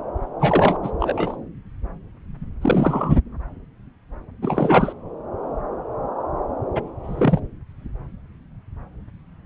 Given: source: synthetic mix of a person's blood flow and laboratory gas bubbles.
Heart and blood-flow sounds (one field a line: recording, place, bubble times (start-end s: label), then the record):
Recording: Doppler ultrasound of blood flow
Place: subclavian vein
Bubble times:
0.39-0.78 s: bubbles
0.82-0.91 s: bubbles
0.99-1.36 s: bubbles
2.61-3.17 s: bubbles
4.42-4.93 s: bubbles
6.75-6.82 s: bubbles
7.04-7.40 s: bubbles
From the record:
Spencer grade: 2 (many but less than half of the cardiac periods contain bubble signals, singularly or in groups)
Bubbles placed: anywhere in the cardiac cycle